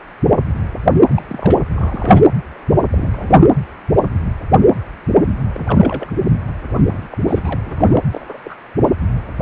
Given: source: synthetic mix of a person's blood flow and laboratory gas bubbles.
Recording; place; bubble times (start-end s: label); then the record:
Doppler ultrasound of blood flow; precordium
1.08-1.61 s: bubbles
1.69-2.23 s: bubbles
2.92-3.47 s: bubbles
5.53-6.11 s: bubbles
6.84-7.17 s: bubbles
7.27-7.60 s: bubbles
7.65-8.03 s: bubbles
8.11-8.38 s: bubbles
8.44-8.55 s: bubbles
From the record:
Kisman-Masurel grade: 221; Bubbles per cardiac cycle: several, 3 to 8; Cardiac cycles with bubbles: 10 to 50%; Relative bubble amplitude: barely perceptible (0.100 to 0.250); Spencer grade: 2 (many but less than half of the cardiac periods contain bubble signals, singularly or in groups); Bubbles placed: anywhere in the cardiac cycle